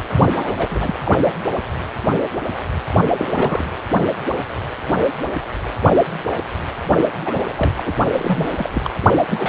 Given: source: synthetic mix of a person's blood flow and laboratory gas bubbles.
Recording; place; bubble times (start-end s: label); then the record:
Doppler ultrasound of blood flow; precordium
0.35-0.56 s: bubbles
0.58-0.67 s: bubbles
0.70-1.31 s: bubbles
3.09-3.65 s: bubbles
7.25-7.41 s: bubbles
7.47-7.83 s: bubbles
7.86-7.95 s: bubbles
8.17-8.51 s: bubbles
8.56-8.70 s: bubbles
8.73-8.91 s: bubbles
9.30-9.49 s: bubbles
From the record:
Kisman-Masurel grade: 332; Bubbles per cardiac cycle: rolling drumbeat, 9 or more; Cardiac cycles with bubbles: 50 to 99%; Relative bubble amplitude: moderate (0.250 to 0.450); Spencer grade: 3 (all of the cardiac periods contain showers or single bubble signals, but not dominating or overriding the cardiac motion signals); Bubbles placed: only in the low amplitude regions of the cardiac cycle